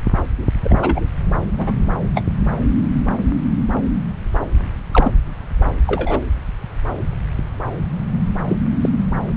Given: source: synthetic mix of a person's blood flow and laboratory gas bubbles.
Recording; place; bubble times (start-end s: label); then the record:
Doppler ultrasound of blood flow; subclavian vein
0.64-1.00 s: bubbles
1.58-1.74 s: bubbles
2.15-2.23 s: bubbles
4.91-5.12 s: bubbles
5.87-6.20 s: bubbles
8.47-8.55 s: bubbles
8.81-8.89 s: bubbles
From the record:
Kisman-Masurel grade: 123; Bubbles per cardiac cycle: 1 to 2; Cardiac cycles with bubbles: 10 to 50%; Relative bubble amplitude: loud (0.450 to 0.775); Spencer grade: 2 (many but less than half of the cardiac periods contain bubble signals, singularly or in groups); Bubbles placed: anywhere in the cardiac cycle